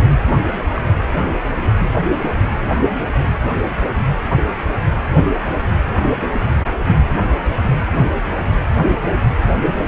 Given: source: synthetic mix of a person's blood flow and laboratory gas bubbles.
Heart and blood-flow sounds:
Doppler ultrasound of blood flow; precordium
0.75-0.82 s: bubbles
6.31-6.41 s: bubbles
9.46-9.60 s: bubbles
9.82-9.88 s: bubbles
From the record:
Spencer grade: 2 (many but less than half of the cardiac periods contain bubble signals, singularly or in groups); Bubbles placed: anywhere in the cardiac cycle

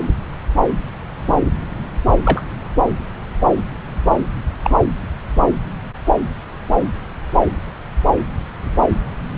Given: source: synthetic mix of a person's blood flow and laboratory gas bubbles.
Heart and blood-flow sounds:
Doppler ultrasound of blood flow; subclavian vein
2.25-2.42 s: bubbles
4.62-4.71 s: bubbles
From the record:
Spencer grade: 1 (occasional bubble signal discernible with the cardiac motion signal, with majority of cardiac periods free of bubbles); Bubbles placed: anywhere in the cardiac cycle

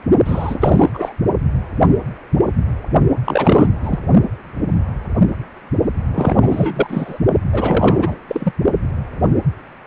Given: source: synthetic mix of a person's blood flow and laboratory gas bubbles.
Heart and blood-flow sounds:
Doppler ultrasound of blood flow; precordium
0.24-0.90 s: bubbles
0.94-1.12 s: bubbles
3.25-3.69 s: bubbles
3.83-3.98 s: bubbles
6.14-7.19 s: bubbles
7.53-8.18 s: bubbles
8.28-8.51 s: bubbles
From the record:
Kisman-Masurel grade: 333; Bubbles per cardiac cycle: rolling drumbeat, 9 or more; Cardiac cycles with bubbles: 50 to 99%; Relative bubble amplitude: loud (0.450 to 0.775); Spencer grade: 3 (all of the cardiac periods contain showers or single bubble signals, but not dominating or overriding the cardiac motion signals); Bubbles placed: only in the low amplitude regions of the cardiac cycle

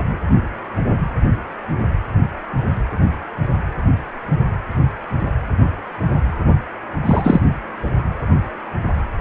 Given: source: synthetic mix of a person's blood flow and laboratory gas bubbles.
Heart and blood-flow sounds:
Doppler ultrasound of blood flow; precordium
7.05-7.40 s: bubbles
From the record:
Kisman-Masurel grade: 213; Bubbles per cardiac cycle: several, 3 to 8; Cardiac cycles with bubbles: 1 to 10%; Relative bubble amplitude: loud (0.450 to 0.775); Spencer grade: 1 (occasional bubble signal discernible with the cardiac motion signal, with majority of cardiac periods free of bubbles); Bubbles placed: only in the low amplitude regions of the cardiac cycle

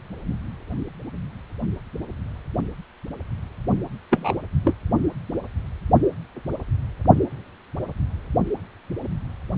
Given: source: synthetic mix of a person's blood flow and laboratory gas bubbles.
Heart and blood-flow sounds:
Doppler ultrasound of blood flow; precordium
4.11-4.33 s: bubbles
4.64-4.75 s: bubbles
From the record:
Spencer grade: 1 (occasional bubble signal discernible with the cardiac motion signal, with majority of cardiac periods free of bubbles); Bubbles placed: only in the low amplitude regions of the cardiac cycle

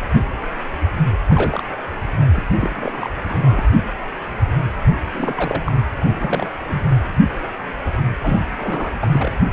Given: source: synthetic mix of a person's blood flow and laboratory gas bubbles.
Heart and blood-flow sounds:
Doppler ultrasound of blood flow; precordium
1.28-1.62 s: bubbles
2.34-2.43 s: bubbles
2.54-3.09 s: bubbles
3.24-3.63 s: bubbles
5.12-5.72 s: bubbles
6.08-6.48 s: bubbles
6.67-6.83 s: bubbles
8.23-8.40 s: bubbles
8.56-8.91 s: bubbles
9.01-9.32 s: bubbles
From the record:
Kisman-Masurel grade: 222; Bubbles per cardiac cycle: several, 3 to 8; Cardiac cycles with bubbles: 10 to 50%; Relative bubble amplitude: moderate (0.250 to 0.450); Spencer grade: 2 (many but less than half of the cardiac periods contain bubble signals, singularly or in groups); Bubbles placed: anywhere in the cardiac cycle

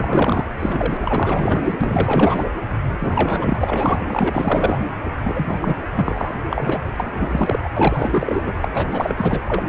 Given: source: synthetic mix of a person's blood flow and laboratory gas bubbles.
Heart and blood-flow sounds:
Doppler ultrasound of blood flow; precordium
0.00-0.47 s: bubbles
0.59-0.98 s: bubbles
1.02-1.78 s: bubbles
1.81-2.44 s: bubbles
2.88-4.05 s: bubbles
4.10-4.87 s: bubbles
5.23-5.76 s: bubbles
5.94-6.35 s: bubbles
6.50-6.79 s: bubbles
6.94-7.59 s: bubbles
7.63-7.69 s: bubbles
7.77-8.52 s: bubbles
8.61-8.65 s: bubbles
8.73-9.39 s: bubbles
9.47-9.63 s: bubbles
From the record:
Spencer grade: 4 (maximum detectable bubble signal sounding continuously throughout systole and diastole of every cardiac period, and overriding the amplitude of the normal cardiac signals); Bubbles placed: anywhere in the cardiac cycle

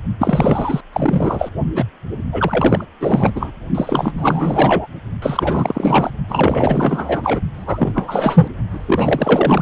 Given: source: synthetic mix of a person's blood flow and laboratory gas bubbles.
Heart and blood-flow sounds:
Doppler ultrasound of blood flow; precordium
0.18-0.81 s: bubbles
0.93-1.49 s: bubbles
1.75-1.85 s: bubbles
2.32-2.85 s: bubbles
3.00-3.32 s: bubbles
3.35-3.51 s: bubbles
3.74-4.12 s: bubbles
4.17-4.87 s: bubbles
5.22-6.13 s: bubbles
6.28-7.40 s: bubbles
7.53-8.49 s: bubbles
8.70-9.62 s: bubbles
From the record:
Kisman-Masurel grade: 444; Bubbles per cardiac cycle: continuous sound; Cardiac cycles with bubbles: 100%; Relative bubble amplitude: maximal (0.775 to 0.999); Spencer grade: 4 (maximum detectable bubble signal sounding continuously throughout systole and diastole of every cardiac period, and overriding the amplitude of the normal cardiac signals); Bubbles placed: only in the low amplitude regions of the cardiac cycle

